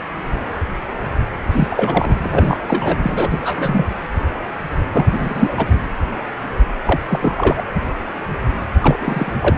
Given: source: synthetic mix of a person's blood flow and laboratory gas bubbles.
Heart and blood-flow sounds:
Doppler ultrasound of blood flow; precordium
1.51-2.17 s: bubbles
2.23-2.59 s: bubbles
2.67-2.98 s: bubbles
3.02-3.85 s: bubbles
4.93-5.08 s: bubbles
5.12-5.53 s: bubbles
5.57-5.68 s: bubbles
6.86-7.00 s: bubbles
7.08-7.35 s: bubbles
7.37-7.62 s: bubbles
8.80-9.33 s: bubbles
9.41-9.58 s: bubbles
From the record:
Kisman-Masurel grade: 333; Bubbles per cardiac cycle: rolling drumbeat, 9 or more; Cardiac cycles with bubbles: 50 to 99%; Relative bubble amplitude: loud (0.450 to 0.775); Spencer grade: 3 (all of the cardiac periods contain showers or single bubble signals, but not dominating or overriding the cardiac motion signals); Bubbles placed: anywhere in the cardiac cycle

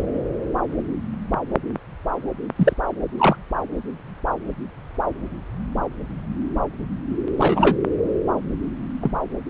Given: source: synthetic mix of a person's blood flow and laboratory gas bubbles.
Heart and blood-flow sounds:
Doppler ultrasound of blood flow; subclavian vein
2.56-2.73 s: bubbles
3.18-3.36 s: bubbles
7.38-7.75 s: bubbles
9.01-9.11 s: bubbles
From the record:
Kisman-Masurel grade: 123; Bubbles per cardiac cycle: 1 to 2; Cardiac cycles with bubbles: 10 to 50%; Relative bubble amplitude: loud (0.450 to 0.775); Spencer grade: 2 (many but less than half of the cardiac periods contain bubble signals, singularly or in groups); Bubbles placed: anywhere in the cardiac cycle

